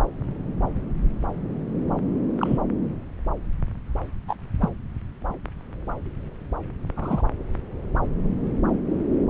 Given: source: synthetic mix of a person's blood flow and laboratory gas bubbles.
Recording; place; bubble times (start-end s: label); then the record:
Doppler ultrasound of blood flow; subclavian vein
2.38-2.59 s: bubbles
4.28-4.35 s: bubbles
4.61-4.69 s: bubbles
6.96-7.23 s: bubbles
From the record:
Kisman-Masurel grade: 122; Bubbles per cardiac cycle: 1 to 2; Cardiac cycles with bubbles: 10 to 50%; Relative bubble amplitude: moderate (0.250 to 0.450); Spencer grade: 2 (many but less than half of the cardiac periods contain bubble signals, singularly or in groups); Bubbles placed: anywhere in the cardiac cycle